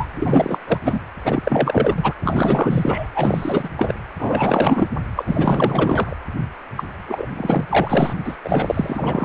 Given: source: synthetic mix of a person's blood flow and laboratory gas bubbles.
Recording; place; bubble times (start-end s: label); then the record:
Doppler ultrasound of blood flow; precordium
0.00-0.07 s: bubbles
0.11-0.58 s: bubbles
0.67-0.77 s: bubbles
0.84-1.00 s: bubbles
1.24-1.93 s: bubbles
1.97-2.14 s: bubbles
2.23-3.07 s: bubbles
3.12-3.70 s: bubbles
3.77-3.94 s: bubbles
4.18-4.88 s: bubbles
5.16-5.22 s: bubbles
5.26-6.16 s: bubbles
6.77-6.84 s: bubbles
7.08-7.26 s: bubbles
7.37-7.65 s: bubbles
7.68-8.15 s: bubbles
8.24-8.37 s: bubbles
8.44-9.25 s: bubbles
From the record:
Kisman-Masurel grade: 444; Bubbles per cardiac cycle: continuous sound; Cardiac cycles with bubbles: 100%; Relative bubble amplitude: maximal (0.775 to 0.999); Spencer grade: 4 (maximum detectable bubble signal sounding continuously throughout systole and diastole of every cardiac period, and overriding the amplitude of the normal cardiac signals); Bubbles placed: anywhere in the cardiac cycle